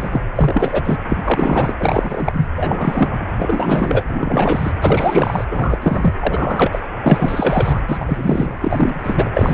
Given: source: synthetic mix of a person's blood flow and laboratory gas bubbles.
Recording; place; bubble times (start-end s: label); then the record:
Doppler ultrasound of blood flow; precordium
0.00-0.24 s: bubbles
0.35-0.97 s: bubbles
1.08-1.17 s: bubbles
1.24-1.74 s: bubbles
1.79-2.49 s: bubbles
2.56-3.25 s: bubbles
3.38-4.04 s: bubbles
4.09-4.72 s: bubbles
4.80-5.45 s: bubbles
5.51-6.13 s: bubbles
6.20-6.80 s: bubbles
7.01-7.80 s: bubbles
7.88-9.29 s: bubbles
9.34-9.54 s: bubbles
From the record:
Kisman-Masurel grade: 343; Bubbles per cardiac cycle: rolling drumbeat, 9 or more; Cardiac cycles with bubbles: 100%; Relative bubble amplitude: loud (0.450 to 0.775); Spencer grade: 3 (all of the cardiac periods contain showers or single bubble signals, but not dominating or overriding the cardiac motion signals); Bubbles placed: anywhere in the cardiac cycle